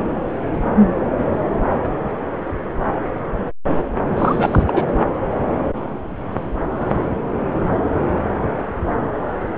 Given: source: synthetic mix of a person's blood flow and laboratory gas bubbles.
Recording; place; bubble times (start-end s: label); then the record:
Doppler ultrasound of blood flow; subclavian vein
4.17-4.63 s: bubbles
4.67-4.85 s: bubbles
From the record:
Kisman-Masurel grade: 212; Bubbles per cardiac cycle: several, 3 to 8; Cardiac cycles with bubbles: 1 to 10%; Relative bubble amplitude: moderate (0.250 to 0.450); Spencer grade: 1 (occasional bubble signal discernible with the cardiac motion signal, with majority of cardiac periods free of bubbles); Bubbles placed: anywhere in the cardiac cycle